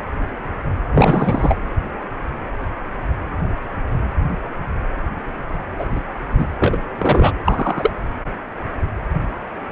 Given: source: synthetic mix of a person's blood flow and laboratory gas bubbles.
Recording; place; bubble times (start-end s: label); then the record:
Doppler ultrasound of blood flow; precordium
0.91-1.56 s: bubbles
5.78-5.88 s: bubbles
5.92-6.00 s: bubbles
6.30-6.55 s: bubbles
6.62-6.78 s: bubbles
6.97-7.32 s: bubbles
7.44-7.92 s: bubbles
From the record:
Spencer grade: 2 (many but less than half of the cardiac periods contain bubble signals, singularly or in groups); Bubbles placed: anywhere in the cardiac cycle